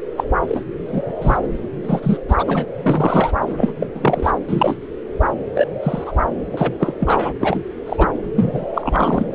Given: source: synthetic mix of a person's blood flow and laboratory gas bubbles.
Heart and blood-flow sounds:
Doppler ultrasound of blood flow; subclavian vein
0.17-0.24 s: bubbles
0.47-0.61 s: bubbles
0.88-1.14 s: bubbles
1.21-1.37 s: bubbles
1.83-2.17 s: bubbles
2.28-2.67 s: bubbles
2.83-3.32 s: bubbles
3.46-3.72 s: bubbles
3.80-3.87 s: bubbles
3.94-4.31 s: bubbles
4.49-4.75 s: bubbles
5.54-5.67 s: bubbles
5.83-6.12 s: bubbles
6.52-6.73 s: bubbles
6.79-6.94 s: bubbles
6.99-7.33 s: bubbles
7.39-7.60 s: bubbles
7.86-8.07 s: bubbles
8.35-8.65 s: bubbles
8.74-9.25 s: bubbles
From the record:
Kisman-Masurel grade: 243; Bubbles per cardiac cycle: several, 3 to 8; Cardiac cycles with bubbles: 100%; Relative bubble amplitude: loud (0.450 to 0.775); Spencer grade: 3 (all of the cardiac periods contain showers or single bubble signals, but not dominating or overriding the cardiac motion signals); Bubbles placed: anywhere in the cardiac cycle

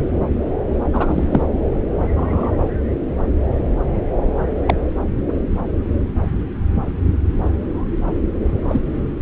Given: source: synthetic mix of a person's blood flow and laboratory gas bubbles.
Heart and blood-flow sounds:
Doppler ultrasound of blood flow; subclavian vein
0.93-1.42 s: bubbles
2.10-2.54 s: bubbles
4.67-4.74 s: bubbles
8.69-8.80 s: bubbles
From the record:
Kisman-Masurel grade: 123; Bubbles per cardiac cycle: 1 to 2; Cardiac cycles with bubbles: 10 to 50%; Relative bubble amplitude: loud (0.450 to 0.775); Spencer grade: 2 (many but less than half of the cardiac periods contain bubble signals, singularly or in groups); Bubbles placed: anywhere in the cardiac cycle

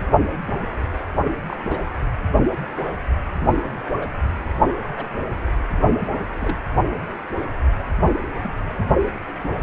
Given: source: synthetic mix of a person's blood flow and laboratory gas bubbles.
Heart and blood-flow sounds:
Doppler ultrasound of blood flow; precordium
1.48-1.57 s: bubbles
1.68-1.84 s: bubbles
3.38-3.53 s: bubbles
3.99-4.08 s: bubbles
4.83-5.07 s: bubbles
6.37-6.57 s: bubbles
8.43-8.53 s: bubbles
From the record:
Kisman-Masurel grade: 121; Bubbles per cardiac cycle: 1 to 2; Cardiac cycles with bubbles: 10 to 50%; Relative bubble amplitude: barely perceptible (0.100 to 0.250); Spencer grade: 2 (many but less than half of the cardiac periods contain bubble signals, singularly or in groups); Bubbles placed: anywhere in the cardiac cycle

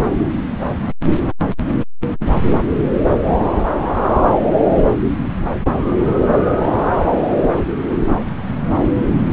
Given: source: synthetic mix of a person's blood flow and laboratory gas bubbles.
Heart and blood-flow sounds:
Doppler ultrasound of blood flow; subclavian vein
no bubbles
From the record:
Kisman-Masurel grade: 000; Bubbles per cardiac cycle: 0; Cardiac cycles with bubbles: 0%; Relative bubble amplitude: no bubbles discernible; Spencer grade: 0 (complete lack of bubble signals)

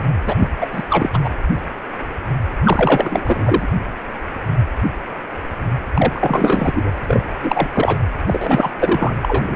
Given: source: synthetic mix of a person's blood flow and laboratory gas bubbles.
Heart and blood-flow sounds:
Doppler ultrasound of blood flow; precordium
0.26-0.35 s: bubbles
0.39-0.50 s: bubbles
0.61-0.67 s: bubbles
0.72-0.84 s: bubbles
0.89-1.10 s: bubbles
1.13-1.19 s: bubbles
1.23-1.29 s: bubbles
2.64-3.67 s: bubbles
5.93-6.92 s: bubbles
7.07-7.24 s: bubbles
7.42-7.68 s: bubbles
7.72-7.98 s: bubbles
8.27-8.71 s: bubbles
8.79-9.14 s: bubbles
9.22-9.43 s: bubbles
9.47-9.56 s: bubbles
From the record:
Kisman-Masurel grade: 333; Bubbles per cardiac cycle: rolling drumbeat, 9 or more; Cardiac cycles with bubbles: 50 to 99%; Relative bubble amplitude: loud (0.450 to 0.775); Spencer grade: 3 (all of the cardiac periods contain showers or single bubble signals, but not dominating or overriding the cardiac motion signals); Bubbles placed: anywhere in the cardiac cycle

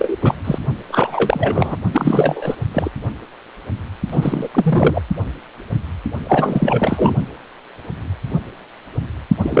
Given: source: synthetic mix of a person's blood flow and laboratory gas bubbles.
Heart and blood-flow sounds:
Doppler ultrasound of blood flow; precordium
0.00-0.16 s: bubbles
0.21-0.34 s: bubbles
0.44-0.58 s: bubbles
0.88-1.77 s: bubbles
1.93-2.55 s: bubbles
2.73-2.90 s: bubbles
4.11-4.50 s: bubbles
4.54-5.01 s: bubbles
6.25-7.16 s: bubbles
9.38-9.60 s: bubbles
From the record:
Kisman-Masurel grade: 333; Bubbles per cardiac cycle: rolling drumbeat, 9 or more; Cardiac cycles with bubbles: 50 to 99%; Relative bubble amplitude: loud (0.450 to 0.775); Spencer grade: 3 (all of the cardiac periods contain showers or single bubble signals, but not dominating or overriding the cardiac motion signals); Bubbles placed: only in the low amplitude regions of the cardiac cycle

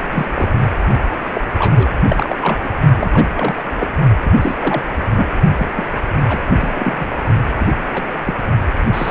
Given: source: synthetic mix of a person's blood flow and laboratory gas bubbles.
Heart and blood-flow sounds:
Doppler ultrasound of blood flow; precordium
0.11-0.26 s: bubbles
0.34-0.49 s: bubbles
1.33-1.41 s: bubbles
1.58-1.89 s: bubbles
2.08-2.35 s: bubbles
2.42-2.58 s: bubbles
2.64-2.71 s: bubbles
2.96-3.10 s: bubbles
3.13-3.25 s: bubbles
3.35-3.54 s: bubbles
3.56-3.62 s: bubbles
3.81-3.90 s: bubbles
4.20-4.32 s: bubbles
4.42-4.55 s: bubbles
4.59-4.82 s: bubbles
5.15-5.27 s: bubbles
5.58-5.67 s: bubbles
5.75-5.83 s: bubbles
6.27-6.42 s: bubbles
6.57-7.07 s: bubbles
7.59-7.67 s: bubbles
7.93-8.03 s: bubbles
8.25-8.35 s: bubbles
8.93-9.11 s: bubbles
From the record:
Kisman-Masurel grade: 242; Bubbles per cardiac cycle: several, 3 to 8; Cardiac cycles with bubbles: 100%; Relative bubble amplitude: moderate (0.250 to 0.450); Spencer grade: 3 (all of the cardiac periods contain showers or single bubble signals, but not dominating or overriding the cardiac motion signals); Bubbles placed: only in the low amplitude regions of the cardiac cycle

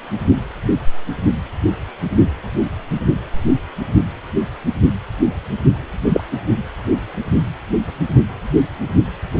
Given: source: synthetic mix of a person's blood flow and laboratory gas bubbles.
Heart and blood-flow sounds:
Doppler ultrasound of blood flow; precordium
6.04-6.21 s: bubbles
From the record:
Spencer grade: 1 (occasional bubble signal discernible with the cardiac motion signal, with majority of cardiac periods free of bubbles); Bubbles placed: only in the low amplitude regions of the cardiac cycle

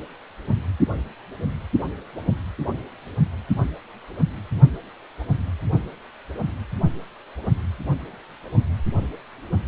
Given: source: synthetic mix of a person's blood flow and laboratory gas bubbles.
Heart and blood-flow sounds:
Doppler ultrasound of blood flow; precordium
no bubbles
From the record:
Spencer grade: 0 (complete lack of bubble signals)

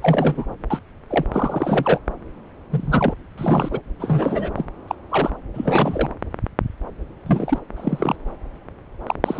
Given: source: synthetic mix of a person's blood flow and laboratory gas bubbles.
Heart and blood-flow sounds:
Doppler ultrasound of blood flow; subclavian vein
0.02-0.51 s: bubbles
0.70-0.79 s: bubbles
1.10-1.25 s: bubbles
1.32-1.98 s: bubbles
2.69-3.14 s: bubbles
3.38-3.80 s: bubbles
4.00-4.50 s: bubbles
4.56-4.65 s: bubbles
4.88-4.95 s: bubbles
5.09-5.31 s: bubbles
5.54-6.09 s: bubbles
7.26-7.58 s: bubbles
7.76-8.15 s: bubbles
9.06-9.15 s: bubbles
9.25-9.40 s: bubbles
From the record:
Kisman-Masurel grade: 232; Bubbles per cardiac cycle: several, 3 to 8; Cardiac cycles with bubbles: 50 to 99%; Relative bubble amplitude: moderate (0.250 to 0.450); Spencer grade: 3 (all of the cardiac periods contain showers or single bubble signals, but not dominating or overriding the cardiac motion signals); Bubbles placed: anywhere in the cardiac cycle

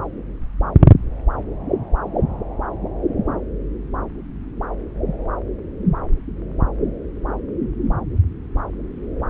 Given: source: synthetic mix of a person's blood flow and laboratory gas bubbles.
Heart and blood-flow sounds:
Doppler ultrasound of blood flow; subclavian vein
no bubbles
From the record:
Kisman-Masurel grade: 000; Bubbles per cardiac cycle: 0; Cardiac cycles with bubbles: 0%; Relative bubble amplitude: no bubbles discernible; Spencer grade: 0 (complete lack of bubble signals)

